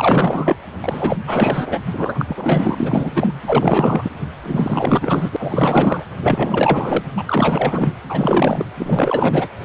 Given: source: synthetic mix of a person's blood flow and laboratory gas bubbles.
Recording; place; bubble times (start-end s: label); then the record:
Doppler ultrasound of blood flow; precordium
0.00-0.56 s: bubbles
0.82-1.17 s: bubbles
1.27-1.79 s: bubbles
1.93-3.32 s: bubbles
3.46-4.10 s: bubbles
4.42-5.29 s: bubbles
5.31-6.03 s: bubbles
6.21-7.07 s: bubbles
7.16-7.22 s: bubbles
7.26-7.93 s: bubbles
8.09-8.66 s: bubbles
8.79-9.47 s: bubbles
From the record:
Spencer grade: 4 (maximum detectable bubble signal sounding continuously throughout systole and diastole of every cardiac period, and overriding the amplitude of the normal cardiac signals); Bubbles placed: anywhere in the cardiac cycle